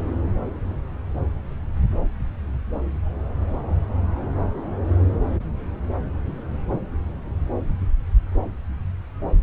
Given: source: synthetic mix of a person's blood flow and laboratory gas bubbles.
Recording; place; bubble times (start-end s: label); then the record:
Doppler ultrasound of blood flow; subclavian vein
no bubbles
From the record:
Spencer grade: 0 (complete lack of bubble signals)